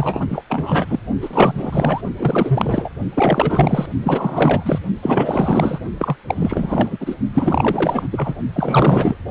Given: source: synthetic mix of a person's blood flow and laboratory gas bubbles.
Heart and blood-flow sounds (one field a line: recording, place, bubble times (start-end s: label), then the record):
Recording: Doppler ultrasound of blood flow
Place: precordium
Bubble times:
0.00-0.44 s: bubbles
0.49-0.85 s: bubbles
0.89-0.99 s: bubbles
1.21-2.01 s: bubbles
2.17-2.90 s: bubbles
3.15-3.86 s: bubbles
4.02-4.79 s: bubbles
5.02-5.79 s: bubbles
5.99-6.17 s: bubbles
6.27-7.15 s: bubbles
7.34-8.08 s: bubbles
8.12-8.35 s: bubbles
8.54-9.16 s: bubbles
From the record:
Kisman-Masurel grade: 444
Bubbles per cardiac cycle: continuous sound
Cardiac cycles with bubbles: 100%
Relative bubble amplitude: maximal (0.775 to 0.999)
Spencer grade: 4 (maximum detectable bubble signal sounding continuously throughout systole and diastole of every cardiac period, and overriding the amplitude of the normal cardiac signals)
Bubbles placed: only in the low amplitude regions of the cardiac cycle